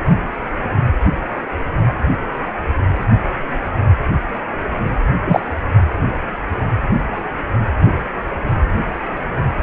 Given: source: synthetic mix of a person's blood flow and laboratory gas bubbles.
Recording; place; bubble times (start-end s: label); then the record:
Doppler ultrasound of blood flow; precordium
5.25-5.41 s: bubbles
From the record:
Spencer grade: 1 (occasional bubble signal discernible with the cardiac motion signal, with majority of cardiac periods free of bubbles); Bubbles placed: anywhere in the cardiac cycle